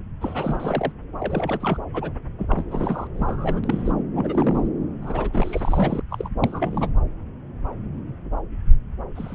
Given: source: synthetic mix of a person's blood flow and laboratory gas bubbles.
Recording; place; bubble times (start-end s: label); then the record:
Doppler ultrasound of blood flow; subclavian vein
0.21-0.92 s: bubbles
1.19-1.78 s: bubbles
1.93-2.11 s: bubbles
2.38-3.07 s: bubbles
3.15-3.61 s: bubbles
3.63-3.92 s: bubbles
4.15-4.68 s: bubbles
5.01-6.01 s: bubbles
6.10-6.29 s: bubbles
6.41-6.89 s: bubbles
9.15-9.35 s: bubbles
From the record:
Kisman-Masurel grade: 332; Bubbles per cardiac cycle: rolling drumbeat, 9 or more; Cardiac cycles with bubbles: 50 to 99%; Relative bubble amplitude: moderate (0.250 to 0.450); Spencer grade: 3 (all of the cardiac periods contain showers or single bubble signals, but not dominating or overriding the cardiac motion signals); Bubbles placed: anywhere in the cardiac cycle